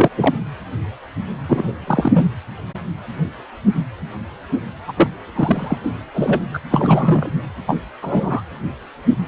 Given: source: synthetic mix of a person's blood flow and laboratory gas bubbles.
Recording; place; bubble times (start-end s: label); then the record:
Doppler ultrasound of blood flow; precordium
0.00-0.09 s: bubbles
0.17-0.37 s: bubbles
1.47-1.73 s: bubbles
1.86-2.26 s: bubbles
4.88-4.92 s: bubbles
4.97-5.10 s: bubbles
5.35-5.79 s: bubbles
5.83-5.92 s: bubbles
6.14-6.40 s: bubbles
6.54-6.60 s: bubbles
6.70-7.33 s: bubbles
7.67-7.77 s: bubbles
8.02-8.42 s: bubbles
From the record:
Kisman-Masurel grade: 233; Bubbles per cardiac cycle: several, 3 to 8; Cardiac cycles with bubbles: 50 to 99%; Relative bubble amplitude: loud (0.450 to 0.775); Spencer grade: 3 (all of the cardiac periods contain showers or single bubble signals, but not dominating or overriding the cardiac motion signals); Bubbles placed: anywhere in the cardiac cycle